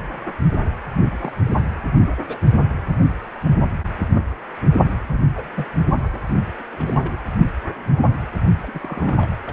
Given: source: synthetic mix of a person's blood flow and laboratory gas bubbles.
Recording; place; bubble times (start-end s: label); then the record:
Doppler ultrasound of blood flow; precordium
1.14-1.16 s: bubbles
1.19-1.70 s: bubbles
2.28-2.39 s: bubbles
4.76-4.82 s: bubbles
5.11-5.21 s: bubbles
5.35-5.50 s: bubbles
5.56-5.66 s: bubbles
6.00-6.10 s: bubbles
6.60-6.63 s: bubbles
6.71-7.19 s: bubbles
8.59-8.71 s: bubbles
8.74-8.80 s: bubbles
8.83-9.28 s: bubbles
9.30-9.36 s: bubbles
9.46-9.53 s: bubbles
From the record:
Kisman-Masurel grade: 221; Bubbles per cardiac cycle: several, 3 to 8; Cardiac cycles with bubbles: 10 to 50%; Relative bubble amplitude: barely perceptible (0.100 to 0.250); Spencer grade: 2 (many but less than half of the cardiac periods contain bubble signals, singularly or in groups); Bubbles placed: only in the low amplitude regions of the cardiac cycle